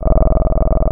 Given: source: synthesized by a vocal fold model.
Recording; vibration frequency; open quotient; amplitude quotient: sustained vowel; 20 Hz; 0.4; 1